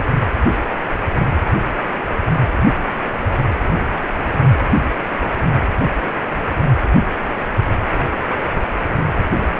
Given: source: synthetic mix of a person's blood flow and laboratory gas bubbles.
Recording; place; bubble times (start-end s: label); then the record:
Doppler ultrasound of blood flow; precordium
no bubbles
From the record:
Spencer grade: 0 (complete lack of bubble signals)